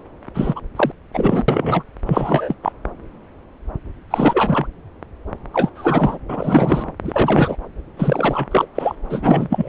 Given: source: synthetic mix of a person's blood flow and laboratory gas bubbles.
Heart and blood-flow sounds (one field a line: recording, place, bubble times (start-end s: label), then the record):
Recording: Doppler ultrasound of blood flow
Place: subclavian vein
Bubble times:
0.34-0.60 s: bubbles
0.76-0.91 s: bubbles
1.14-1.45 s: bubbles
1.48-1.83 s: bubbles
2.06-2.55 s: bubbles
2.62-2.73 s: bubbles
4.10-4.67 s: bubbles
5.53-5.70 s: bubbles
5.75-6.19 s: bubbles
6.28-6.92 s: bubbles
7.04-7.56 s: bubbles
7.97-8.47 s: bubbles
8.51-8.66 s: bubbles
8.74-8.95 s: bubbles
9.10-9.69 s: bubbles
From the record:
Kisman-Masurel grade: 333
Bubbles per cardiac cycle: rolling drumbeat, 9 or more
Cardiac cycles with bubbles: 50 to 99%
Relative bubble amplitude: loud (0.450 to 0.775)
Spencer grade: 3 (all of the cardiac periods contain showers or single bubble signals, but not dominating or overriding the cardiac motion signals)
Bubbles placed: anywhere in the cardiac cycle